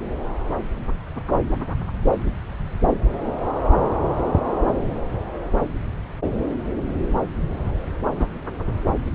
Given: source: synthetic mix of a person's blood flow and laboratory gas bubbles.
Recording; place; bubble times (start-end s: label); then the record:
Doppler ultrasound of blood flow; subclavian vein
8.15-8.27 s: bubbles
From the record:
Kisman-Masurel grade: 112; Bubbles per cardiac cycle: 1 to 2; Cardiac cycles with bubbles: 1 to 10%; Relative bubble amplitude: moderate (0.250 to 0.450); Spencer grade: 1 (occasional bubble signal discernible with the cardiac motion signal, with majority of cardiac periods free of bubbles); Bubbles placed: anywhere in the cardiac cycle